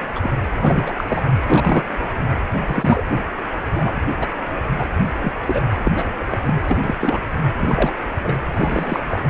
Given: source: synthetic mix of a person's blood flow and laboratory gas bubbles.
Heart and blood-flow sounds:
Doppler ultrasound of blood flow; precordium
0.15-0.30 s: bubbles
0.54-1.04 s: bubbles
1.08-1.23 s: bubbles
1.46-1.85 s: bubbles
2.56-3.02 s: bubbles
3.70-4.00 s: bubbles
4.20-4.28 s: bubbles
4.78-4.84 s: bubbles
5.21-5.33 s: bubbles
5.46-5.63 s: bubbles
5.83-5.92 s: bubbles
5.95-6.16 s: bubbles
6.20-6.25 s: bubbles
6.30-6.54 s: bubbles
6.67-7.21 s: bubbles
7.58-7.92 s: bubbles
8.24-8.34 s: bubbles
8.54-9.00 s: bubbles
9.08-9.19 s: bubbles
From the record:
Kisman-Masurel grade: 243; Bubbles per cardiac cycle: several, 3 to 8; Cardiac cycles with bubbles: 100%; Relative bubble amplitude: loud (0.450 to 0.775); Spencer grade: 3 (all of the cardiac periods contain showers or single bubble signals, but not dominating or overriding the cardiac motion signals); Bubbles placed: anywhere in the cardiac cycle

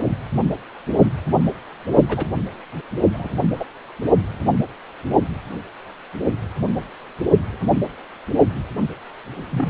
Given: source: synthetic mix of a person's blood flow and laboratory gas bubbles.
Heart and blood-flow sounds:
Doppler ultrasound of blood flow; precordium
2.08-2.25 s: bubbles
3.13-3.40 s: bubbles
3.54-3.65 s: bubbles
9.50-9.70 s: bubbles
From the record:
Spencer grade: 2 (many but less than half of the cardiac periods contain bubble signals, singularly or in groups); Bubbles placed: only in the low amplitude regions of the cardiac cycle

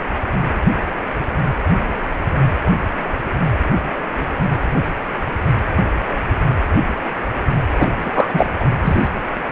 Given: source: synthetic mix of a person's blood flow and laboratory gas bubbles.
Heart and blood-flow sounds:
Doppler ultrasound of blood flow; precordium
7.78-7.90 s: bubbles
7.99-8.46 s: bubbles
8.60-8.65 s: bubbles
8.83-9.11 s: bubbles
From the record:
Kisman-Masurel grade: 223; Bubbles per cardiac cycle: several, 3 to 8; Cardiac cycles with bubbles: 10 to 50%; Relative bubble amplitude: loud (0.450 to 0.775); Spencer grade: 2 (many but less than half of the cardiac periods contain bubble signals, singularly or in groups); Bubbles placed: anywhere in the cardiac cycle

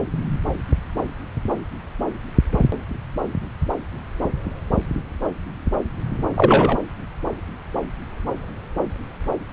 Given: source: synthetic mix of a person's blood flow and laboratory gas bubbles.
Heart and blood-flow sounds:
Doppler ultrasound of blood flow; subclavian vein
6.36-6.77 s: bubbles
From the record:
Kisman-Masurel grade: 113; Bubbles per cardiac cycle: 1 to 2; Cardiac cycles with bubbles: 1 to 10%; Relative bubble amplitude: loud (0.450 to 0.775); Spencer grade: 1 (occasional bubble signal discernible with the cardiac motion signal, with majority of cardiac periods free of bubbles); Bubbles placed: anywhere in the cardiac cycle

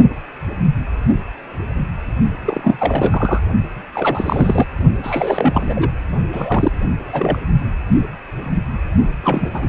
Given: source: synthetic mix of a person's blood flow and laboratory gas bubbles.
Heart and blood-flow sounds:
Doppler ultrasound of blood flow; precordium
2.45-3.40 s: bubbles
3.94-4.66 s: bubbles
5.03-6.02 s: bubbles
6.32-6.71 s: bubbles
7.05-7.38 s: bubbles
9.24-9.50 s: bubbles
9.54-9.69 s: bubbles
From the record:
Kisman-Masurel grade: 332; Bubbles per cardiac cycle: rolling drumbeat, 9 or more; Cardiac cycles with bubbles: 50 to 99%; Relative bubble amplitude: moderate (0.250 to 0.450); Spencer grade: 3 (all of the cardiac periods contain showers or single bubble signals, but not dominating or overriding the cardiac motion signals); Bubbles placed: only in the low amplitude regions of the cardiac cycle

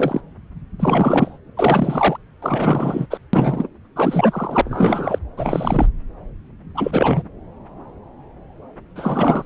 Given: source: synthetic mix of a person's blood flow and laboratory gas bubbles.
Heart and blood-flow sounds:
Doppler ultrasound of blood flow; subclavian vein
0.00-0.21 s: bubbles
0.79-1.38 s: bubbles
1.56-2.17 s: bubbles
2.42-3.06 s: bubbles
3.10-3.18 s: bubbles
3.33-3.67 s: bubbles
3.96-4.62 s: bubbles
4.65-5.19 s: bubbles
5.37-5.87 s: bubbles
6.75-7.23 s: bubbles
8.96-9.46 s: bubbles
From the record:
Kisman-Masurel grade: 333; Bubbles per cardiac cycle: rolling drumbeat, 9 or more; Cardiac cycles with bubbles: 50 to 99%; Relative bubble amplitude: loud (0.450 to 0.775); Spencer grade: 3 (all of the cardiac periods contain showers or single bubble signals, but not dominating or overriding the cardiac motion signals); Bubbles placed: anywhere in the cardiac cycle

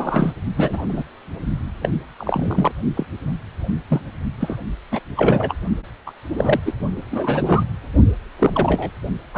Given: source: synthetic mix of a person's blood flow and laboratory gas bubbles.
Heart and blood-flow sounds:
Doppler ultrasound of blood flow; precordium
0.00-0.32 s: bubbles
0.57-0.85 s: bubbles
0.89-1.03 s: bubbles
1.82-1.89 s: bubbles
2.18-2.72 s: bubbles
2.96-3.06 s: bubbles
3.88-4.01 s: bubbles
4.40-4.56 s: bubbles
4.91-5.00 s: bubbles
5.16-5.54 s: bubbles
6.06-6.13 s: bubbles
6.34-6.59 s: bubbles
6.65-6.73 s: bubbles
7.11-7.63 s: bubbles
8.38-8.90 s: bubbles
9.34-9.38 s: bubbles
From the record:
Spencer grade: 3 (all of the cardiac periods contain showers or single bubble signals, but not dominating or overriding the cardiac motion signals); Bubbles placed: only in the low amplitude regions of the cardiac cycle

